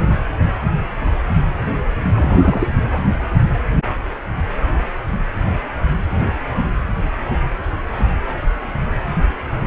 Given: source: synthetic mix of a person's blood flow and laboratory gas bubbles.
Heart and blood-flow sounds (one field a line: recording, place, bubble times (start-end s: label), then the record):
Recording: Doppler ultrasound of blood flow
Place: precordium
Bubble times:
2.16-2.70 s: bubbles
2.92-2.99 s: bubbles
From the record:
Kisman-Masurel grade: 212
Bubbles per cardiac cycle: several, 3 to 8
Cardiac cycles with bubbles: 1 to 10%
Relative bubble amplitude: moderate (0.250 to 0.450)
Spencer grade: 1 (occasional bubble signal discernible with the cardiac motion signal, with majority of cardiac periods free of bubbles)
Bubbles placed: anywhere in the cardiac cycle